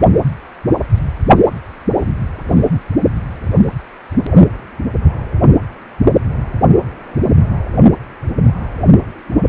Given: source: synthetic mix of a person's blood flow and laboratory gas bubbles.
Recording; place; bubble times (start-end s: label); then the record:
Doppler ultrasound of blood flow; precordium
no bubbles
From the record:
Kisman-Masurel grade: 000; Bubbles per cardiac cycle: 0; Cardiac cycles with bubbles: 0%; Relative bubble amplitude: no bubbles discernible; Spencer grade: 0 (complete lack of bubble signals)